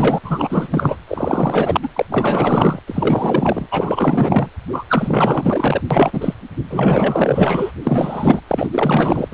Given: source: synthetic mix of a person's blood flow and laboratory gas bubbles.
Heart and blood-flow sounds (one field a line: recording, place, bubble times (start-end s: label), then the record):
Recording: Doppler ultrasound of blood flow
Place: precordium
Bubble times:
0.00-0.18 s: bubbles
0.23-0.96 s: bubbles
1.07-1.89 s: bubbles
1.95-2.05 s: bubbles
2.10-2.79 s: bubbles
2.86-3.66 s: bubbles
3.71-4.48 s: bubbles
4.72-4.84 s: bubbles
4.88-5.81 s: bubbles
5.91-6.34 s: bubbles
6.69-7.74 s: bubbles
7.83-8.41 s: bubbles
8.48-8.70 s: bubbles
8.72-9.28 s: bubbles
9.31-9.34 s: bubbles
From the record:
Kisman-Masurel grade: 444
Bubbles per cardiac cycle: continuous sound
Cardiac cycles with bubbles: 100%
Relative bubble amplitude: maximal (0.775 to 0.999)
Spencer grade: 4 (maximum detectable bubble signal sounding continuously throughout systole and diastole of every cardiac period, and overriding the amplitude of the normal cardiac signals)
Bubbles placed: anywhere in the cardiac cycle